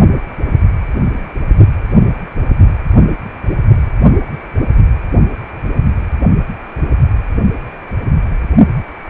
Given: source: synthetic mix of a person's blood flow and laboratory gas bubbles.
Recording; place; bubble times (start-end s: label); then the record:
Doppler ultrasound of blood flow; precordium
no bubbles
From the record:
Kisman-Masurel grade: 000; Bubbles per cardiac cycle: 0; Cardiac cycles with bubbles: 0%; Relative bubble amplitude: no bubbles discernible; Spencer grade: 0 (complete lack of bubble signals)